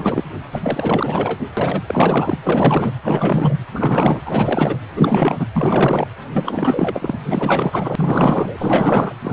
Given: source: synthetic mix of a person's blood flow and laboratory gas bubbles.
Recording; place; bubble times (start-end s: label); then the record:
Doppler ultrasound of blood flow; precordium
0.00-0.24 s: bubbles
0.52-1.39 s: bubbles
1.57-1.82 s: bubbles
1.86-2.38 s: bubbles
2.44-2.92 s: bubbles
3.02-3.54 s: bubbles
3.72-4.21 s: bubbles
4.25-4.79 s: bubbles
4.93-5.46 s: bubbles
5.55-6.08 s: bubbles
6.33-7.19 s: bubbles
7.25-9.14 s: bubbles
9.21-9.33 s: bubbles
From the record:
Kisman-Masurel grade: 444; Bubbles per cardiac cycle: continuous sound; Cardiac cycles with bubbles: 100%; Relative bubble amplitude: maximal (0.775 to 0.999); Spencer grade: 4 (maximum detectable bubble signal sounding continuously throughout systole and diastole of every cardiac period, and overriding the amplitude of the normal cardiac signals); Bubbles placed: anywhere in the cardiac cycle